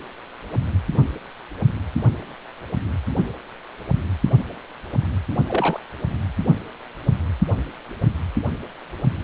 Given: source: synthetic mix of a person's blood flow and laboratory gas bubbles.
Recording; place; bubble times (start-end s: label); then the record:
Doppler ultrasound of blood flow; precordium
5.47-5.79 s: bubbles
From the record:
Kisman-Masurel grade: 122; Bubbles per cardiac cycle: 1 to 2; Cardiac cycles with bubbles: 10 to 50%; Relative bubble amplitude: moderate (0.250 to 0.450); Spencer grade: 2 (many but less than half of the cardiac periods contain bubble signals, singularly or in groups); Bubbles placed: anywhere in the cardiac cycle